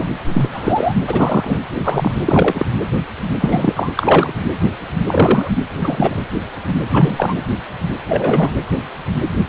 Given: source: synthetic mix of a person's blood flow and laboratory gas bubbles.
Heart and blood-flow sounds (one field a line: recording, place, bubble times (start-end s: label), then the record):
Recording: Doppler ultrasound of blood flow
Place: precordium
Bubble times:
0.00-0.09 s: bubbles
0.33-0.49 s: bubbles
0.52-0.93 s: bubbles
0.96-1.02 s: bubbles
1.07-1.60 s: bubbles
1.74-2.12 s: bubbles
2.25-2.65 s: bubbles
3.40-3.73 s: bubbles
3.75-3.92 s: bubbles
3.96-4.34 s: bubbles
5.07-5.51 s: bubbles
5.69-6.18 s: bubbles
6.90-7.36 s: bubbles
8.09-8.52 s: bubbles
From the record:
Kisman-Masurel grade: 233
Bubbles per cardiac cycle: several, 3 to 8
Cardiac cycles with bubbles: 50 to 99%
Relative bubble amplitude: loud (0.450 to 0.775)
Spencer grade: 3 (all of the cardiac periods contain showers or single bubble signals, but not dominating or overriding the cardiac motion signals)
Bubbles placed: anywhere in the cardiac cycle